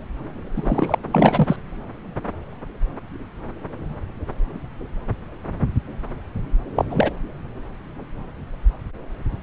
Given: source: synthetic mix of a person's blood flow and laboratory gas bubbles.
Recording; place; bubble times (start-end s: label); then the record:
Doppler ultrasound of blood flow; subclavian vein
0.55-0.97 s: bubbles
1.12-1.56 s: bubbles
6.76-6.85 s: bubbles
6.89-7.12 s: bubbles
From the record:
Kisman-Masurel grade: 223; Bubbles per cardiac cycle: several, 3 to 8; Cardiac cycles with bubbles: 10 to 50%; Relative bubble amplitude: loud (0.450 to 0.775); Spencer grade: 2 (many but less than half of the cardiac periods contain bubble signals, singularly or in groups); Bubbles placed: anywhere in the cardiac cycle